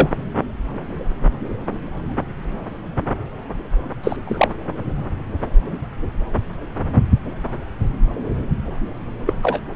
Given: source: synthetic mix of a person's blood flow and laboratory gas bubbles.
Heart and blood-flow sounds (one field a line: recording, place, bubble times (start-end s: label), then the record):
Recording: Doppler ultrasound of blood flow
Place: subclavian vein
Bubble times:
0.00-0.08 s: bubbles
4.04-4.17 s: bubbles
4.25-4.47 s: bubbles
9.26-9.33 s: bubbles
9.43-9.61 s: bubbles
From the record:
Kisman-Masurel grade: 123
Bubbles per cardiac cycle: 1 to 2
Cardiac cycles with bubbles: 10 to 50%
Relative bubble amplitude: loud (0.450 to 0.775)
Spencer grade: 2 (many but less than half of the cardiac periods contain bubble signals, singularly or in groups)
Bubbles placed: anywhere in the cardiac cycle